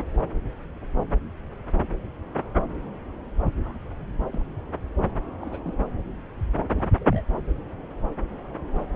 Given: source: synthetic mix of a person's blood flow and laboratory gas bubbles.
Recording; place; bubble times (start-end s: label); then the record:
Doppler ultrasound of blood flow; subclavian vein
3.58-3.79 s: bubbles
3.83-3.91 s: bubbles
3.96-4.20 s: bubbles
4.31-4.42 s: bubbles
5.40-5.60 s: bubbles
5.64-5.73 s: bubbles
6.70-6.73 s: bubbles
6.76-7.22 s: bubbles
From the record:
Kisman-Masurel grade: 221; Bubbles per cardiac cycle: several, 3 to 8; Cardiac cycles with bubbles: 10 to 50%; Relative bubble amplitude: barely perceptible (0.100 to 0.250); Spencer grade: 2 (many but less than half of the cardiac periods contain bubble signals, singularly or in groups); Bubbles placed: anywhere in the cardiac cycle